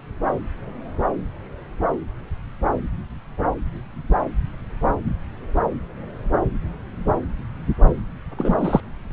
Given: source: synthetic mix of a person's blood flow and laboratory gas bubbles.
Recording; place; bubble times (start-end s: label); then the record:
Doppler ultrasound of blood flow; subclavian vein
8.38-8.81 s: bubbles
9.11-9.13 s: bubbles
From the record:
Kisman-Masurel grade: 213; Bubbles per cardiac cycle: several, 3 to 8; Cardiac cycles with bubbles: 1 to 10%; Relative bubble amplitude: loud (0.450 to 0.775); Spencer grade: 1 (occasional bubble signal discernible with the cardiac motion signal, with majority of cardiac periods free of bubbles); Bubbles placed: anywhere in the cardiac cycle